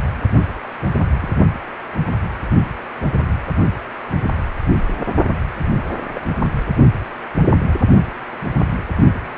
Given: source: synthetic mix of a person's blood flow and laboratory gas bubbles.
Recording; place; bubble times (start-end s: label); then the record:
Doppler ultrasound of blood flow; precordium
1.21-1.30 s: bubbles
6.14-6.21 s: bubbles
From the record:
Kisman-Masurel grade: 121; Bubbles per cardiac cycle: 1 to 2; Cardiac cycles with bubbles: 10 to 50%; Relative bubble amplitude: barely perceptible (0.100 to 0.250); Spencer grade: 2 (many but less than half of the cardiac periods contain bubble signals, singularly or in groups); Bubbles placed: only in the low amplitude regions of the cardiac cycle